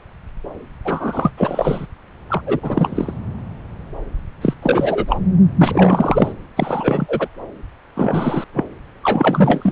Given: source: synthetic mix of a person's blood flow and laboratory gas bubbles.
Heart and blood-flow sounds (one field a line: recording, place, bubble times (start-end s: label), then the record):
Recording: Doppler ultrasound of blood flow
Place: subclavian vein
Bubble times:
0.84-1.31 s: bubbles
1.36-1.86 s: bubbles
2.30-2.42 s: bubbles
2.46-3.14 s: bubbles
4.41-4.54 s: bubbles
4.62-5.20 s: bubbles
5.58-6.33 s: bubbles
6.57-7.28 s: bubbles
7.95-8.44 s: bubbles
8.54-8.66 s: bubbles
9.02-9.72 s: bubbles
From the record:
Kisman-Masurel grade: 333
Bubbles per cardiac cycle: rolling drumbeat, 9 or more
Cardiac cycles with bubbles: 50 to 99%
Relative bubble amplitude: loud (0.450 to 0.775)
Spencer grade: 3 (all of the cardiac periods contain showers or single bubble signals, but not dominating or overriding the cardiac motion signals)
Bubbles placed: anywhere in the cardiac cycle